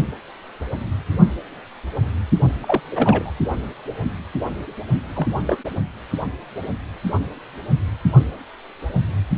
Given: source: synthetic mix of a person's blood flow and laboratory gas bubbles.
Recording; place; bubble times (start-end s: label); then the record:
Doppler ultrasound of blood flow; precordium
2.62-2.81 s: bubbles
2.91-3.31 s: bubbles
5.13-5.28 s: bubbles
5.46-5.57 s: bubbles
From the record:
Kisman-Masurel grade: 222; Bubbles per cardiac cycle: several, 3 to 8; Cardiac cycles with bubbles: 10 to 50%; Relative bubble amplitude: moderate (0.250 to 0.450); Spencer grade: 2 (many but less than half of the cardiac periods contain bubble signals, singularly or in groups); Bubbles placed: only in the low amplitude regions of the cardiac cycle